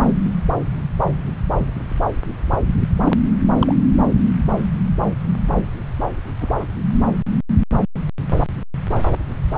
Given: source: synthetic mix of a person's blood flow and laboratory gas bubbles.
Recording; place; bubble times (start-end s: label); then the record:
Doppler ultrasound of blood flow; subclavian vein
3.03-3.16 s: bubbles
3.59-3.76 s: bubbles
6.40-6.52 s: bubbles
6.58-6.67 s: bubbles
From the record:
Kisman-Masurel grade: 122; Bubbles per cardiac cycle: 1 to 2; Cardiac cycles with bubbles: 10 to 50%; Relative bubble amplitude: moderate (0.250 to 0.450); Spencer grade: 2 (many but less than half of the cardiac periods contain bubble signals, singularly or in groups); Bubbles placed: anywhere in the cardiac cycle